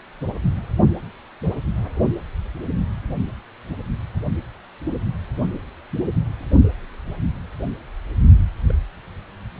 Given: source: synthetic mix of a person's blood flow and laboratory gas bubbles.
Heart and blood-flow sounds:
Doppler ultrasound of blood flow; precordium
8.67-8.75 s: bubbles
From the record:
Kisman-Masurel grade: 111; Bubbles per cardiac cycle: 1 to 2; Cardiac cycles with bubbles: 1 to 10%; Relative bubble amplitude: barely perceptible (0.100 to 0.250); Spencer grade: 1 (occasional bubble signal discernible with the cardiac motion signal, with majority of cardiac periods free of bubbles); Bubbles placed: only in the low amplitude regions of the cardiac cycle

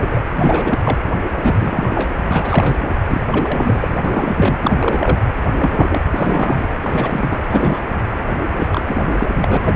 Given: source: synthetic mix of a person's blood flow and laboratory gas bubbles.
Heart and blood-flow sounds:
Doppler ultrasound of blood flow; precordium
0.00-0.08 s: bubbles
0.10-0.22 s: bubbles
0.36-0.98 s: bubbles
1.29-2.10 s: bubbles
2.28-2.77 s: bubbles
3.09-3.21 s: bubbles
3.31-3.98 s: bubbles
4.04-4.57 s: bubbles
4.61-5.18 s: bubbles
5.57-6.00 s: bubbles
6.10-6.67 s: bubbles
6.76-7.38 s: bubbles
7.43-7.79 s: bubbles
8.51-8.68 s: bubbles
8.71-9.04 s: bubbles
9.08-9.25 s: bubbles
9.33-9.76 s: bubbles
From the record:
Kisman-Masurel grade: 343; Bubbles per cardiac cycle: rolling drumbeat, 9 or more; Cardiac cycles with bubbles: 100%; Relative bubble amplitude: loud (0.450 to 0.775); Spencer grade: 3 (all of the cardiac periods contain showers or single bubble signals, but not dominating or overriding the cardiac motion signals); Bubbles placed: anywhere in the cardiac cycle

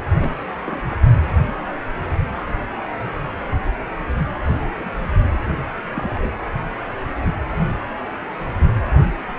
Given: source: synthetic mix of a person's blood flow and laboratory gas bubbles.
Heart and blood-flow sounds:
Doppler ultrasound of blood flow; precordium
0.20-0.35 s: bubbles
0.66-0.97 s: bubbles
4.45-4.58 s: bubbles
4.77-4.91 s: bubbles
5.46-5.54 s: bubbles
5.96-6.31 s: bubbles
7.50-7.67 s: bubbles
From the record:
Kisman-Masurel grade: 121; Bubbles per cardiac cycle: 1 to 2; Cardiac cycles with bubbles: 10 to 50%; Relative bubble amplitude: barely perceptible (0.100 to 0.250); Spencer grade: 2 (many but less than half of the cardiac periods contain bubble signals, singularly or in groups); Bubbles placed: anywhere in the cardiac cycle

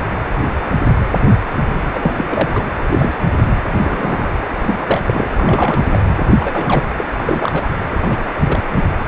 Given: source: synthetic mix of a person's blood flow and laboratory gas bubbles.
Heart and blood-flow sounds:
Doppler ultrasound of blood flow; precordium
1.94-2.13 s: bubbles
2.17-2.50 s: bubbles
2.52-2.64 s: bubbles
2.90-3.15 s: bubbles
3.80-4.29 s: bubbles
4.65-4.79 s: bubbles
4.85-5.28 s: bubbles
5.35-5.88 s: bubbles
5.92-5.98 s: bubbles
6.39-6.92 s: bubbles
6.96-7.04 s: bubbles
7.17-7.62 s: bubbles
8.01-8.19 s: bubbles
8.42-8.59 s: bubbles
8.73-8.88 s: bubbles
From the record:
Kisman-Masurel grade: 232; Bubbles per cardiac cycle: several, 3 to 8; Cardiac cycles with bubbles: 50 to 99%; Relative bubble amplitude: moderate (0.250 to 0.450); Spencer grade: 3 (all of the cardiac periods contain showers or single bubble signals, but not dominating or overriding the cardiac motion signals); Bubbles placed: anywhere in the cardiac cycle

